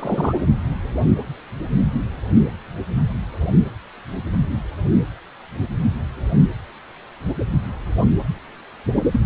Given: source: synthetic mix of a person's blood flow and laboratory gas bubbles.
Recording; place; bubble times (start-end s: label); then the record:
Doppler ultrasound of blood flow; precordium
0.00-0.33 s: bubbles
9.12-9.20 s: bubbles
From the record:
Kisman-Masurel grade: 222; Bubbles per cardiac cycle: several, 3 to 8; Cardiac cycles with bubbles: 10 to 50%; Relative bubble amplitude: moderate (0.250 to 0.450); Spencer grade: 2 (many but less than half of the cardiac periods contain bubble signals, singularly or in groups); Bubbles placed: anywhere in the cardiac cycle